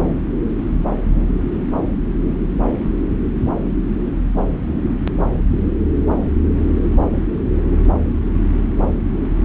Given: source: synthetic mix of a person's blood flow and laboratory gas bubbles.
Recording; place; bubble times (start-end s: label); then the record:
Doppler ultrasound of blood flow; subclavian vein
no bubbles
From the record:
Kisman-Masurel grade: 000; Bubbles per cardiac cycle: 0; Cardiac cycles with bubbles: 0%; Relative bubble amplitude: no bubbles discernible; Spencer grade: 0 (complete lack of bubble signals)